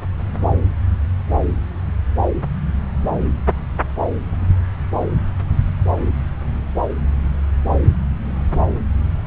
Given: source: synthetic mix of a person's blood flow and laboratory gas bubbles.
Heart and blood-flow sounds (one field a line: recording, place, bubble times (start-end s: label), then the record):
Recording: Doppler ultrasound of blood flow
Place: subclavian vein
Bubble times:
no bubbles
From the record:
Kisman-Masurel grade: 000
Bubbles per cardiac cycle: 0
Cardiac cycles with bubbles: 0%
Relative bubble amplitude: no bubbles discernible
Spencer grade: 0 (complete lack of bubble signals)